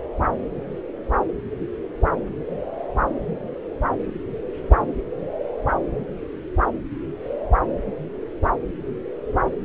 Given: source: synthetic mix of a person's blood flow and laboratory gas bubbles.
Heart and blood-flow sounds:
Doppler ultrasound of blood flow; subclavian vein
no bubbles
From the record:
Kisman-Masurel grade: 000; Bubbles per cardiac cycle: 0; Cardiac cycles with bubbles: 0%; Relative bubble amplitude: no bubbles discernible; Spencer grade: 0 (complete lack of bubble signals)

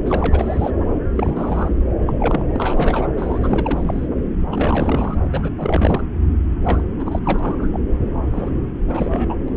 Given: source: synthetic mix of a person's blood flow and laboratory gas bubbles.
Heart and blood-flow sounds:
Doppler ultrasound of blood flow; subclavian vein
0.05-0.70 s: bubbles
0.80-0.85 s: bubbles
1.16-1.70 s: bubbles
2.00-2.13 s: bubbles
2.20-3.08 s: bubbles
3.17-4.07 s: bubbles
4.51-5.18 s: bubbles
5.33-5.50 s: bubbles
5.58-6.03 s: bubbles
6.64-6.80 s: bubbles
6.98-7.19 s: bubbles
7.23-7.68 s: bubbles
7.73-7.79 s: bubbles
8.32-8.50 s: bubbles
8.89-9.35 s: bubbles
9.48-9.50 s: bubbles
From the record:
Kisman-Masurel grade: 332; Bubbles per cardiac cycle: rolling drumbeat, 9 or more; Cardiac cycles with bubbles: 50 to 99%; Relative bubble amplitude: moderate (0.250 to 0.450); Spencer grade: 3 (all of the cardiac periods contain showers or single bubble signals, but not dominating or overriding the cardiac motion signals); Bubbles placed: anywhere in the cardiac cycle

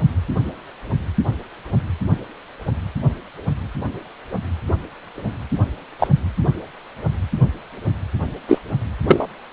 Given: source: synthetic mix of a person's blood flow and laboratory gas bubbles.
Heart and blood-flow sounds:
Doppler ultrasound of blood flow; precordium
5.99-6.08 s: bubbles
8.47-8.59 s: bubbles
9.08-9.27 s: bubbles
From the record:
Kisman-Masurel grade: 123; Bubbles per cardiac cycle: 1 to 2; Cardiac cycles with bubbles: 10 to 50%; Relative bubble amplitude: loud (0.450 to 0.775); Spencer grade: 2 (many but less than half of the cardiac periods contain bubble signals, singularly or in groups); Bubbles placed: anywhere in the cardiac cycle

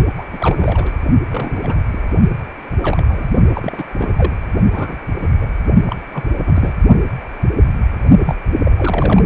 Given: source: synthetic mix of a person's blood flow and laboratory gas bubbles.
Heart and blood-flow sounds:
Doppler ultrasound of blood flow; precordium
0.17-0.22 s: bubbles
0.32-0.55 s: bubbles
0.59-0.96 s: bubbles
1.30-1.82 s: bubbles
1.88-2.01 s: bubbles
2.81-3.33 s: bubbles
3.53-3.85 s: bubbles
3.97-4.15 s: bubbles
4.17-4.32 s: bubbles
4.72-4.96 s: bubbles
5.23-5.29 s: bubbles
5.41-5.48 s: bubbles
5.87-5.96 s: bubbles
6.14-6.24 s: bubbles
6.41-6.78 s: bubbles
8.21-8.35 s: bubbles
8.64-9.25 s: bubbles
From the record:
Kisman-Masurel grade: 232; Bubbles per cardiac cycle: several, 3 to 8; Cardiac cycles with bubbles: 50 to 99%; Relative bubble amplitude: moderate (0.250 to 0.450); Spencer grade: 3 (all of the cardiac periods contain showers or single bubble signals, but not dominating or overriding the cardiac motion signals); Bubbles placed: only in the low amplitude regions of the cardiac cycle

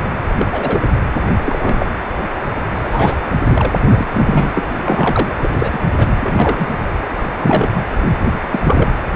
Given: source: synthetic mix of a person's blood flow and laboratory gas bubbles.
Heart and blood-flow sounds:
Doppler ultrasound of blood flow; precordium
0.00-0.09 s: bubbles
0.40-0.47 s: bubbles
0.51-0.85 s: bubbles
0.94-0.99 s: bubbles
1.41-1.86 s: bubbles
2.74-3.18 s: bubbles
3.50-3.73 s: bubbles
3.87-4.07 s: bubbles
4.12-4.52 s: bubbles
4.54-4.63 s: bubbles
4.72-5.35 s: bubbles
5.40-5.54 s: bubbles
5.58-5.80 s: bubbles
5.98-6.07 s: bubbles
6.21-6.68 s: bubbles
7.18-7.23 s: bubbles
7.41-7.83 s: bubbles
8.51-8.89 s: bubbles
9.13-9.16 s: bubbles
From the record:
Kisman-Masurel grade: 242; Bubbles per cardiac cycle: several, 3 to 8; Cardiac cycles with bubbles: 100%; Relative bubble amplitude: moderate (0.250 to 0.450); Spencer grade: 3 (all of the cardiac periods contain showers or single bubble signals, but not dominating or overriding the cardiac motion signals); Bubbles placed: anywhere in the cardiac cycle

